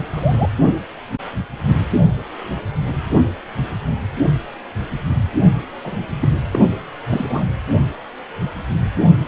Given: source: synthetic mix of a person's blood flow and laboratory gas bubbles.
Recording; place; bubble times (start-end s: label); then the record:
Doppler ultrasound of blood flow; precordium
0.12-0.50 s: bubbles
5.84-6.07 s: bubbles
6.20-6.28 s: bubbles
6.51-6.59 s: bubbles
7.09-7.46 s: bubbles
From the record:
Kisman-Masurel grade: 232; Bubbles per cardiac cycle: several, 3 to 8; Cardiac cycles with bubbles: 50 to 99%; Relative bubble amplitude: moderate (0.250 to 0.450); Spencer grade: 3 (all of the cardiac periods contain showers or single bubble signals, but not dominating or overriding the cardiac motion signals); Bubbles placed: only in the low amplitude regions of the cardiac cycle